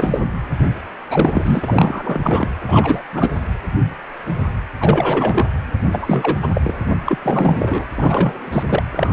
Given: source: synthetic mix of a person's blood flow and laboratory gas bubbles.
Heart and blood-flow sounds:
Doppler ultrasound of blood flow; precordium
0.00-0.22 s: bubbles
1.07-2.48 s: bubbles
2.68-3.03 s: bubbles
3.12-3.43 s: bubbles
4.80-5.48 s: bubbles
5.92-6.36 s: bubbles
6.42-6.50 s: bubbles
6.54-6.61 s: bubbles
6.63-6.79 s: bubbles
7.06-7.18 s: bubbles
7.22-7.85 s: bubbles
7.96-8.63 s: bubbles
8.69-8.83 s: bubbles
8.91-9.13 s: bubbles
From the record:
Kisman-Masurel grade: 333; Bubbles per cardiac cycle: rolling drumbeat, 9 or more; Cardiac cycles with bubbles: 50 to 99%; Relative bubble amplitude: loud (0.450 to 0.775); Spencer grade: 3 (all of the cardiac periods contain showers or single bubble signals, but not dominating or overriding the cardiac motion signals); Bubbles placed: anywhere in the cardiac cycle

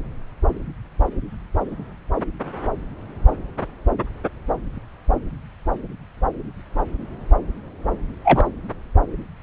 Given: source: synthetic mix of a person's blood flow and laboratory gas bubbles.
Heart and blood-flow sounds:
Doppler ultrasound of blood flow; subclavian vein
8.24-8.47 s: bubbles
From the record:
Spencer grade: 1 (occasional bubble signal discernible with the cardiac motion signal, with majority of cardiac periods free of bubbles); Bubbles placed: anywhere in the cardiac cycle

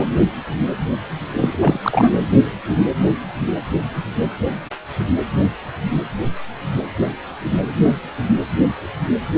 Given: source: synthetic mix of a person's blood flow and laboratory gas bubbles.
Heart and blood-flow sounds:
Doppler ultrasound of blood flow; precordium
0.00-0.03 s: bubbles
1.39-2.20 s: bubbles
From the record:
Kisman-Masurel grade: 223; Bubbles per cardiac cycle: several, 3 to 8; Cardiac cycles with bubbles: 10 to 50%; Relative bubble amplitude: loud (0.450 to 0.775); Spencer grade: 2 (many but less than half of the cardiac periods contain bubble signals, singularly or in groups); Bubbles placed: anywhere in the cardiac cycle

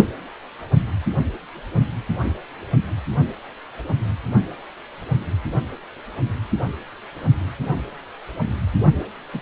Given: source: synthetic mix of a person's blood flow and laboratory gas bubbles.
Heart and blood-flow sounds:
Doppler ultrasound of blood flow; precordium
9.33-9.41 s: bubbles
From the record:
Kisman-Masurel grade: 111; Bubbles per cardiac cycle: 1 to 2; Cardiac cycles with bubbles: 1 to 10%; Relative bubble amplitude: barely perceptible (0.100 to 0.250); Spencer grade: 1 (occasional bubble signal discernible with the cardiac motion signal, with majority of cardiac periods free of bubbles); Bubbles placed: only in the low amplitude regions of the cardiac cycle

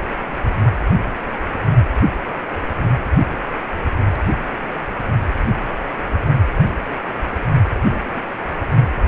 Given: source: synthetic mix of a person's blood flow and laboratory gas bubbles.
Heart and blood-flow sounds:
Doppler ultrasound of blood flow; precordium
7.90-8.23 s: bubbles
From the record:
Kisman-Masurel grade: 112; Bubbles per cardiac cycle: 1 to 2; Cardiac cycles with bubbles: 1 to 10%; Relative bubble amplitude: moderate (0.250 to 0.450); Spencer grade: 1 (occasional bubble signal discernible with the cardiac motion signal, with majority of cardiac periods free of bubbles); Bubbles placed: anywhere in the cardiac cycle

